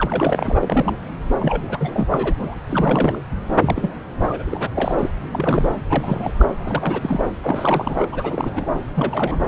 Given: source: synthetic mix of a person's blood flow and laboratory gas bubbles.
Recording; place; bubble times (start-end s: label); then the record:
Doppler ultrasound of blood flow; subclavian vein
0.00-0.96 s: bubbles
1.39-1.62 s: bubbles
1.67-2.08 s: bubbles
2.11-2.34 s: bubbles
2.39-2.60 s: bubbles
2.68-3.19 s: bubbles
3.47-3.90 s: bubbles
4.19-4.42 s: bubbles
4.46-4.69 s: bubbles
4.75-5.09 s: bubbles
5.30-5.74 s: bubbles
5.88-6.46 s: bubbles
6.63-7.22 s: bubbles
7.42-8.08 s: bubbles
8.12-8.66 s: bubbles
8.95-9.46 s: bubbles
From the record:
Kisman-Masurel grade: 342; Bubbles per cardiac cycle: rolling drumbeat, 9 or more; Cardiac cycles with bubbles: 100%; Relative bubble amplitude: moderate (0.250 to 0.450); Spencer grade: 3 (all of the cardiac periods contain showers or single bubble signals, but not dominating or overriding the cardiac motion signals); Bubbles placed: anywhere in the cardiac cycle